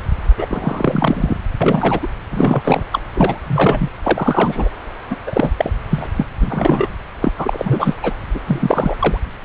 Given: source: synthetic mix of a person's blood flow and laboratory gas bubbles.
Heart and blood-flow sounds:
Doppler ultrasound of blood flow; subclavian vein
0.37-1.36 s: bubbles
1.60-2.07 s: bubbles
2.32-2.83 s: bubbles
2.92-3.00 s: bubbles
3.14-3.41 s: bubbles
3.47-3.90 s: bubbles
4.04-4.70 s: bubbles
5.10-5.16 s: bubbles
5.27-5.50 s: bubbles
5.58-5.71 s: bubbles
5.90-6.07 s: bubbles
6.16-6.26 s: bubbles
6.40-6.89 s: bubbles
7.21-7.33 s: bubbles
7.38-7.94 s: bubbles
8.02-8.13 s: bubbles
8.34-8.40 s: bubbles
8.46-8.95 s: bubbles
8.99-9.18 s: bubbles
From the record:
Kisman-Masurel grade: 343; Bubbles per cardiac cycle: rolling drumbeat, 9 or more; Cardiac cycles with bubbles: 100%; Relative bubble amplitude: loud (0.450 to 0.775); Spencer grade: 3 (all of the cardiac periods contain showers or single bubble signals, but not dominating or overriding the cardiac motion signals); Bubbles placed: anywhere in the cardiac cycle

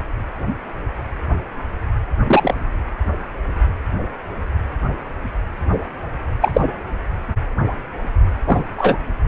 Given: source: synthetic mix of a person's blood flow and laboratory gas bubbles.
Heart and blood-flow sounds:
Doppler ultrasound of blood flow; precordium
2.27-2.54 s: bubbles
6.41-6.61 s: bubbles
8.46-8.65 s: bubbles
8.78-8.98 s: bubbles
From the record:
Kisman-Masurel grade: 123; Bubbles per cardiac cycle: 1 to 2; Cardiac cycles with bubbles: 10 to 50%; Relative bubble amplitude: loud (0.450 to 0.775); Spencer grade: 2 (many but less than half of the cardiac periods contain bubble signals, singularly or in groups); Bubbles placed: anywhere in the cardiac cycle

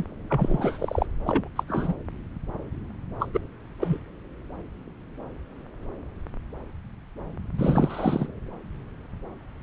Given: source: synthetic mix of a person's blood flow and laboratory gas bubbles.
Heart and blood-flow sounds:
Doppler ultrasound of blood flow; subclavian vein
0.00-0.04 s: bubbles
0.30-1.06 s: bubbles
1.23-1.48 s: bubbles
1.55-1.64 s: bubbles
1.68-1.95 s: bubbles
3.20-3.27 s: bubbles
3.33-3.39 s: bubbles
3.80-3.98 s: bubbles
7.57-8.27 s: bubbles
From the record:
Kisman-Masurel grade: 222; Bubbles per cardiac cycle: several, 3 to 8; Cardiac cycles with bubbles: 10 to 50%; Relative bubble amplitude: moderate (0.250 to 0.450); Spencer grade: 2 (many but less than half of the cardiac periods contain bubble signals, singularly or in groups); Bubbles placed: anywhere in the cardiac cycle

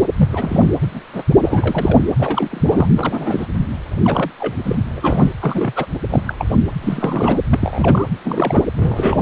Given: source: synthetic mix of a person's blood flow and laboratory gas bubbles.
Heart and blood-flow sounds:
Doppler ultrasound of blood flow; precordium
0.17-0.29 s: bubbles
0.32-0.74 s: bubbles
0.82-0.87 s: bubbles
0.90-1.01 s: bubbles
1.13-1.24 s: bubbles
1.44-2.13 s: bubbles
2.18-2.48 s: bubbles
2.51-2.87 s: bubbles
2.96-3.46 s: bubbles
4.04-4.31 s: bubbles
4.39-4.55 s: bubbles
4.63-4.75 s: bubbles
4.93-5.31 s: bubbles
5.41-5.73 s: bubbles
5.76-5.85 s: bubbles
6.10-6.22 s: bubbles
6.27-6.34 s: bubbles
6.38-6.56 s: bubbles
6.81-7.40 s: bubbles
7.50-8.08 s: bubbles
8.24-8.67 s: bubbles
8.77-9.22 s: bubbles
From the record:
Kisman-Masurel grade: 242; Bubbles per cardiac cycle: several, 3 to 8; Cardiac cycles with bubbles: 100%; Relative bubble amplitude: moderate (0.250 to 0.450); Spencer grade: 3 (all of the cardiac periods contain showers or single bubble signals, but not dominating or overriding the cardiac motion signals); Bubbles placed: anywhere in the cardiac cycle

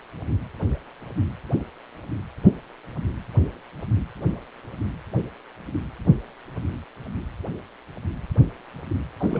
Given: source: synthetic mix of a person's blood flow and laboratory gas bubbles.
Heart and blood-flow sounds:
Doppler ultrasound of blood flow; precordium
9.20-9.40 s: bubbles
From the record:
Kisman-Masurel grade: 221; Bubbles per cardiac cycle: several, 3 to 8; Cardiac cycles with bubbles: 10 to 50%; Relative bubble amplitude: barely perceptible (0.100 to 0.250); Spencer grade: 2 (many but less than half of the cardiac periods contain bubble signals, singularly or in groups); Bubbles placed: anywhere in the cardiac cycle

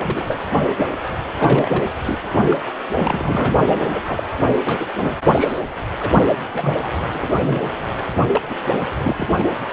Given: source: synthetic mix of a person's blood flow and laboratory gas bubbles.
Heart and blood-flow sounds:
Doppler ultrasound of blood flow; precordium
0.00-0.24 s: bubbles
0.27-0.41 s: bubbles
0.78-0.85 s: bubbles
1.40-1.90 s: bubbles
2.06-2.18 s: bubbles
2.25-2.60 s: bubbles
2.88-4.24 s: bubbles
4.65-4.93 s: bubbles
5.00-5.17 s: bubbles
5.30-5.62 s: bubbles
6.00-6.12 s: bubbles
6.53-6.77 s: bubbles
6.79-7.28 s: bubbles
7.33-7.70 s: bubbles
8.16-8.25 s: bubbles
8.29-8.42 s: bubbles
8.50-8.54 s: bubbles
8.70-8.81 s: bubbles
8.95-9.28 s: bubbles
9.38-9.48 s: bubbles
From the record:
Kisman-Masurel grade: 242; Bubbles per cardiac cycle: several, 3 to 8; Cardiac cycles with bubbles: 100%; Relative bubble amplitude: moderate (0.250 to 0.450); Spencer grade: 3 (all of the cardiac periods contain showers or single bubble signals, but not dominating or overriding the cardiac motion signals); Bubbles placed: anywhere in the cardiac cycle

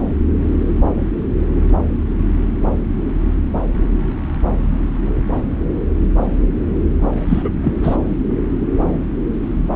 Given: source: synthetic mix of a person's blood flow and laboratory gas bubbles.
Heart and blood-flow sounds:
Doppler ultrasound of blood flow; subclavian vein
7.29-7.51 s: bubbles
7.64-7.73 s: bubbles
7.83-7.97 s: bubbles
From the record:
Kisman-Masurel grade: 213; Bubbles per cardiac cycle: several, 3 to 8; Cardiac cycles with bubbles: 1 to 10%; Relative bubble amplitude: loud (0.450 to 0.775); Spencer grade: 1 (occasional bubble signal discernible with the cardiac motion signal, with majority of cardiac periods free of bubbles); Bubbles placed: anywhere in the cardiac cycle

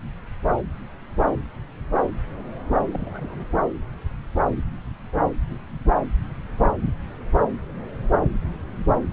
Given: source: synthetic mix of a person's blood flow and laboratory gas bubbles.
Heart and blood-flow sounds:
Doppler ultrasound of blood flow; subclavian vein
2.91-3.47 s: bubbles
From the record:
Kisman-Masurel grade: 211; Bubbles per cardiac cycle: several, 3 to 8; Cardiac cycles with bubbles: 1 to 10%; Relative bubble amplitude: barely perceptible (0.100 to 0.250); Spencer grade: 1 (occasional bubble signal discernible with the cardiac motion signal, with majority of cardiac periods free of bubbles); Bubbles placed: anywhere in the cardiac cycle

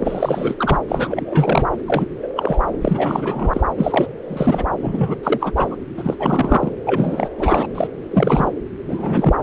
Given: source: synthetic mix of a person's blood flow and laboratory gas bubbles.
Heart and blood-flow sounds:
Doppler ultrasound of blood flow; subclavian vein
0.00-0.54 s: bubbles
0.58-0.79 s: bubbles
0.88-1.67 s: bubbles
1.86-2.05 s: bubbles
2.22-2.28 s: bubbles
2.36-2.59 s: bubbles
2.81-3.67 s: bubbles
3.77-4.07 s: bubbles
4.27-4.64 s: bubbles
4.77-5.15 s: bubbles
5.23-5.52 s: bubbles
5.56-5.76 s: bubbles
5.97-6.16 s: bubbles
6.19-6.72 s: bubbles
6.86-7.29 s: bubbles
7.37-7.67 s: bubbles
7.75-7.87 s: bubbles
8.11-8.50 s: bubbles
8.88-9.34 s: bubbles
From the record:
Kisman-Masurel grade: 342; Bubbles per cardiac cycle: rolling drumbeat, 9 or more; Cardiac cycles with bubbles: 100%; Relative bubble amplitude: moderate (0.250 to 0.450); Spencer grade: 3 (all of the cardiac periods contain showers or single bubble signals, but not dominating or overriding the cardiac motion signals); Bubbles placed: anywhere in the cardiac cycle

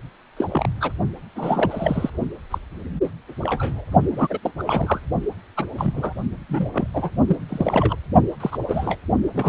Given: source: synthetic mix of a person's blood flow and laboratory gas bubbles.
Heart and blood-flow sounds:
Doppler ultrasound of blood flow; precordium
0.36-0.49 s: bubbles
0.52-0.68 s: bubbles
0.80-0.92 s: bubbles
1.35-2.10 s: bubbles
2.51-2.59 s: bubbles
3.04-3.08 s: bubbles
3.42-3.85 s: bubbles
4.12-4.38 s: bubbles
4.43-4.52 s: bubbles
4.58-5.00 s: bubbles
5.57-5.65 s: bubbles
5.78-6.14 s: bubbles
6.49-6.70 s: bubbles
6.74-6.88 s: bubbles
6.94-7.10 s: bubbles
7.28-7.37 s: bubbles
7.49-7.96 s: bubbles
8.40-8.58 s: bubbles
8.68-8.97 s: bubbles
9.35-9.49 s: bubbles
From the record:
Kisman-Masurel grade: 242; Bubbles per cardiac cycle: several, 3 to 8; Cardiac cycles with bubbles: 100%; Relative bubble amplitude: moderate (0.250 to 0.450); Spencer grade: 3 (all of the cardiac periods contain showers or single bubble signals, but not dominating or overriding the cardiac motion signals); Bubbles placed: only in the low amplitude regions of the cardiac cycle

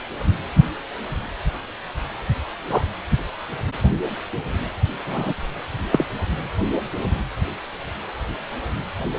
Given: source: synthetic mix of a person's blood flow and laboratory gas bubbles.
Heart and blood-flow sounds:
Doppler ultrasound of blood flow; precordium
2.69-2.83 s: bubbles
5.06-5.33 s: bubbles
5.92-6.06 s: bubbles
From the record:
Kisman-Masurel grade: 123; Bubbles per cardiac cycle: 1 to 2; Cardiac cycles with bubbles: 10 to 50%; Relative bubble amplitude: loud (0.450 to 0.775); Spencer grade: 2 (many but less than half of the cardiac periods contain bubble signals, singularly or in groups); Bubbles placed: anywhere in the cardiac cycle

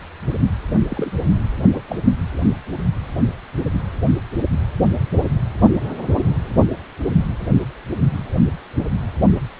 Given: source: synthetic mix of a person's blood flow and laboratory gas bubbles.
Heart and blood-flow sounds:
Doppler ultrasound of blood flow; precordium
0.89-1.11 s: bubbles
1.34-1.40 s: bubbles
1.62-1.67 s: bubbles
1.73-1.83 s: bubbles
1.89-2.02 s: bubbles
From the record:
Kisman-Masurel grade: 211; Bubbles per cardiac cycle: several, 3 to 8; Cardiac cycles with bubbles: 1 to 10%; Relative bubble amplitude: barely perceptible (0.100 to 0.250); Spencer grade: 1 (occasional bubble signal discernible with the cardiac motion signal, with majority of cardiac periods free of bubbles); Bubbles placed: only in the low amplitude regions of the cardiac cycle

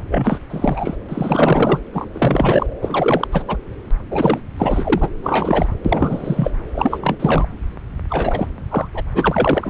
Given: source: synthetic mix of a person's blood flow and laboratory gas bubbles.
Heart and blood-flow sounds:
Doppler ultrasound of blood flow; subclavian vein
0.08-0.39 s: bubbles
0.50-0.95 s: bubbles
1.08-1.80 s: bubbles
1.93-2.08 s: bubbles
2.13-2.67 s: bubbles
2.81-3.27 s: bubbles
3.32-3.43 s: bubbles
3.47-3.56 s: bubbles
4.10-4.42 s: bubbles
4.57-5.09 s: bubbles
5.22-5.73 s: bubbles
5.84-6.51 s: bubbles
6.74-7.16 s: bubbles
7.19-7.48 s: bubbles
8.10-8.48 s: bubbles
8.71-8.89 s: bubbles
8.94-9.02 s: bubbles
9.14-9.69 s: bubbles
From the record:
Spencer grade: 3 (all of the cardiac periods contain showers or single bubble signals, but not dominating or overriding the cardiac motion signals); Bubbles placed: anywhere in the cardiac cycle

